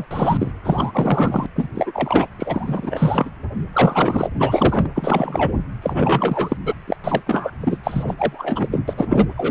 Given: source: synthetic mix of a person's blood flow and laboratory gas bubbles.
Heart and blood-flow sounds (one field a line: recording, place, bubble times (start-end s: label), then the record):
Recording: Doppler ultrasound of blood flow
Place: precordium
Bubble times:
0.00-0.05 s: bubbles
0.10-0.51 s: bubbles
0.64-1.46 s: bubbles
1.55-1.68 s: bubbles
1.74-2.27 s: bubbles
2.38-3.30 s: bubbles
3.73-4.28 s: bubbles
4.39-4.89 s: bubbles
4.95-5.57 s: bubbles
5.82-6.57 s: bubbles
6.65-6.75 s: bubbles
6.87-6.96 s: bubbles
7.04-7.22 s: bubbles
7.27-7.52 s: bubbles
7.60-7.78 s: bubbles
7.83-8.14 s: bubbles
8.17-8.68 s: bubbles
8.71-8.79 s: bubbles
8.88-8.94 s: bubbles
8.97-9.27 s: bubbles
9.37-9.51 s: bubbles
From the record:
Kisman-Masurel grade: 343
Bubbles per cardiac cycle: rolling drumbeat, 9 or more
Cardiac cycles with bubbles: 100%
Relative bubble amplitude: loud (0.450 to 0.775)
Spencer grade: 3 (all of the cardiac periods contain showers or single bubble signals, but not dominating or overriding the cardiac motion signals)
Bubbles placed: anywhere in the cardiac cycle